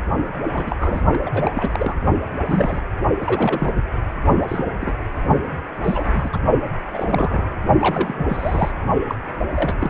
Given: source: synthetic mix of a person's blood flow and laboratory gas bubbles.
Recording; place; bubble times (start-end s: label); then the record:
Doppler ultrasound of blood flow; precordium
0.53-0.76 s: bubbles
0.81-1.01 s: bubbles
1.11-1.19 s: bubbles
1.24-1.30 s: bubbles
1.33-1.94 s: bubbles
2.47-2.82 s: bubbles
3.21-3.72 s: bubbles
4.48-4.66 s: bubbles
4.80-4.95 s: bubbles
5.84-6.29 s: bubbles
6.33-6.38 s: bubbles
6.94-7.54 s: bubbles
7.79-8.26 s: bubbles
8.29-8.71 s: bubbles
9.09-9.15 s: bubbles
9.54-9.90 s: bubbles
From the record:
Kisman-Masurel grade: 232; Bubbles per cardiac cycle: several, 3 to 8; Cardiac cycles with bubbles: 50 to 99%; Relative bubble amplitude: moderate (0.250 to 0.450); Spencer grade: 3 (all of the cardiac periods contain showers or single bubble signals, but not dominating or overriding the cardiac motion signals); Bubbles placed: only in the low amplitude regions of the cardiac cycle